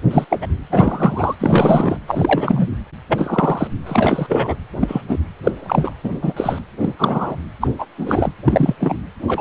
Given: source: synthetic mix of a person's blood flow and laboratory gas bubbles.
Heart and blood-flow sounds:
Doppler ultrasound of blood flow; precordium
0.10-0.24 s: bubbles
0.29-0.39 s: bubbles
0.41-0.47 s: bubbles
0.71-1.35 s: bubbles
1.39-1.98 s: bubbles
2.08-2.68 s: bubbles
3.08-3.67 s: bubbles
3.86-4.55 s: bubbles
4.80-5.01 s: bubbles
5.08-5.17 s: bubbles
5.43-5.51 s: bubbles
5.59-5.93 s: bubbles
6.04-6.11 s: bubbles
6.21-6.33 s: bubbles
6.36-6.59 s: bubbles
6.79-6.93 s: bubbles
6.99-7.37 s: bubbles
7.60-7.68 s: bubbles
7.79-7.86 s: bubbles
7.97-8.31 s: bubbles
8.45-8.76 s: bubbles
8.80-8.96 s: bubbles
9.27-9.41 s: bubbles
From the record:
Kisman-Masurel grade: 243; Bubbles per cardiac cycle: several, 3 to 8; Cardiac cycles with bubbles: 100%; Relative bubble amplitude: loud (0.450 to 0.775); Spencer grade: 3 (all of the cardiac periods contain showers or single bubble signals, but not dominating or overriding the cardiac motion signals); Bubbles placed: anywhere in the cardiac cycle

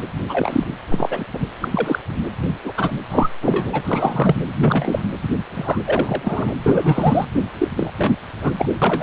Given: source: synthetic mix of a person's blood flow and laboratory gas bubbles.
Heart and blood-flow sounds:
Doppler ultrasound of blood flow; precordium
0.00-0.03 s: bubbles
0.29-0.64 s: bubbles
0.90-1.25 s: bubbles
1.33-1.47 s: bubbles
1.60-1.69 s: bubbles
1.71-1.99 s: bubbles
2.40-2.48 s: bubbles
2.63-2.72 s: bubbles
2.77-2.92 s: bubbles
3.10-3.29 s: bubbles
3.42-3.81 s: bubbles
3.84-4.36 s: bubbles
4.62-5.07 s: bubbles
5.22-5.28 s: bubbles
5.49-6.52 s: bubbles
6.62-7.28 s: bubbles
7.58-7.68 s: bubbles
7.76-7.91 s: bubbles
7.98-8.14 s: bubbles
8.41-8.52 s: bubbles
8.57-8.69 s: bubbles
8.81-9.03 s: bubbles
From the record:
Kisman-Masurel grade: 243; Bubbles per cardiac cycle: several, 3 to 8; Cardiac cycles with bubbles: 100%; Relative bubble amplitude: loud (0.450 to 0.775); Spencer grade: 3 (all of the cardiac periods contain showers or single bubble signals, but not dominating or overriding the cardiac motion signals); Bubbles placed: anywhere in the cardiac cycle

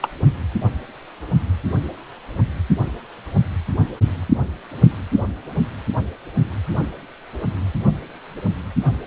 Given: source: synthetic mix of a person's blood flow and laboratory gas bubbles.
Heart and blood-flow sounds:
Doppler ultrasound of blood flow; precordium
0.01-0.08 s: bubbles
From the record:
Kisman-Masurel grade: 112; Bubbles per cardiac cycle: 1 to 2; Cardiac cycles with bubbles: 1 to 10%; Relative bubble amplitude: moderate (0.250 to 0.450); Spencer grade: 1 (occasional bubble signal discernible with the cardiac motion signal, with majority of cardiac periods free of bubbles); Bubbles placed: anywhere in the cardiac cycle

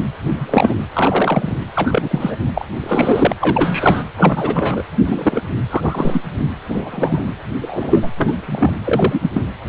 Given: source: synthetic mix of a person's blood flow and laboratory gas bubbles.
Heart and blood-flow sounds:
Doppler ultrasound of blood flow; precordium
0.28-0.76 s: bubbles
0.93-1.55 s: bubbles
1.74-2.35 s: bubbles
2.55-2.65 s: bubbles
2.80-3.33 s: bubbles
3.40-4.03 s: bubbles
4.17-4.83 s: bubbles
5.04-5.45 s: bubbles
5.70-6.21 s: bubbles
6.68-7.24 s: bubbles
7.62-8.07 s: bubbles
8.17-8.73 s: bubbles
8.84-9.41 s: bubbles
From the record:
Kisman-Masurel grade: 243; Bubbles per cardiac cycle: several, 3 to 8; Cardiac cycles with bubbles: 100%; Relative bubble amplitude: loud (0.450 to 0.775); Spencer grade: 3 (all of the cardiac periods contain showers or single bubble signals, but not dominating or overriding the cardiac motion signals); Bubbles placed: anywhere in the cardiac cycle

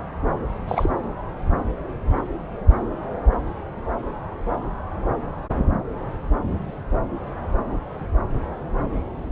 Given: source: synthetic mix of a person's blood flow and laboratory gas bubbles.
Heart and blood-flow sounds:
Doppler ultrasound of blood flow; subclavian vein
0.68-0.92 s: bubbles
From the record:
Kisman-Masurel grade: 212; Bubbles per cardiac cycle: several, 3 to 8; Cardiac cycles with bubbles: 1 to 10%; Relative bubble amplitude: moderate (0.250 to 0.450); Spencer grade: 1 (occasional bubble signal discernible with the cardiac motion signal, with majority of cardiac periods free of bubbles); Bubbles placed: anywhere in the cardiac cycle

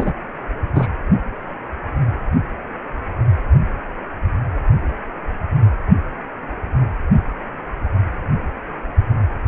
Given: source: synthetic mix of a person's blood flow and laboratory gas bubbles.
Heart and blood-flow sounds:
Doppler ultrasound of blood flow; precordium
0.00-0.12 s: bubbles
0.74-0.87 s: bubbles
From the record:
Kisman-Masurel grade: 113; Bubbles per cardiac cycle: 1 to 2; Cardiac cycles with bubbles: 1 to 10%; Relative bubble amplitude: loud (0.450 to 0.775); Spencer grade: 1 (occasional bubble signal discernible with the cardiac motion signal, with majority of cardiac periods free of bubbles); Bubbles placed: anywhere in the cardiac cycle

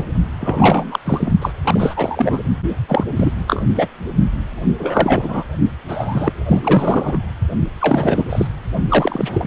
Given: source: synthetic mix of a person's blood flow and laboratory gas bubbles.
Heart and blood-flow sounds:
Doppler ultrasound of blood flow; precordium
0.00-0.04 s: bubbles
0.40-0.99 s: bubbles
1.05-1.33 s: bubbles
1.42-1.52 s: bubbles
1.65-2.39 s: bubbles
2.88-3.04 s: bubbles
3.16-3.33 s: bubbles
3.47-3.62 s: bubbles
3.76-3.87 s: bubbles
4.78-5.43 s: bubbles
5.88-6.32 s: bubbles
6.46-7.17 s: bubbles
7.80-8.47 s: bubbles
8.88-9.47 s: bubbles
From the record:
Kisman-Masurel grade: 343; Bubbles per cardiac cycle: rolling drumbeat, 9 or more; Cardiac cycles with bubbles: 100%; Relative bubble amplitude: loud (0.450 to 0.775); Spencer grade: 3 (all of the cardiac periods contain showers or single bubble signals, but not dominating or overriding the cardiac motion signals); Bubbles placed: only in the low amplitude regions of the cardiac cycle

